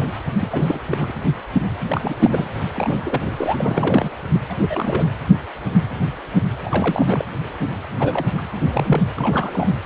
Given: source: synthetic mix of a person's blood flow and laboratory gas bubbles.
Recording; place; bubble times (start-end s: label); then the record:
Doppler ultrasound of blood flow; precordium
0.00-0.06 s: bubbles
0.40-0.80 s: bubbles
0.85-1.14 s: bubbles
1.88-2.48 s: bubbles
2.74-4.10 s: bubbles
4.32-4.40 s: bubbles
4.49-5.05 s: bubbles
6.64-7.25 s: bubbles
7.99-8.30 s: bubbles
8.38-8.43 s: bubbles
8.61-9.04 s: bubbles
9.16-9.70 s: bubbles
9.84-9.86 s: bubbles
From the record:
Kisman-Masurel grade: 332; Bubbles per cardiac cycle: rolling drumbeat, 9 or more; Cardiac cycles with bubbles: 50 to 99%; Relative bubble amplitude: moderate (0.250 to 0.450); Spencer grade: 3 (all of the cardiac periods contain showers or single bubble signals, but not dominating or overriding the cardiac motion signals); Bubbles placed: anywhere in the cardiac cycle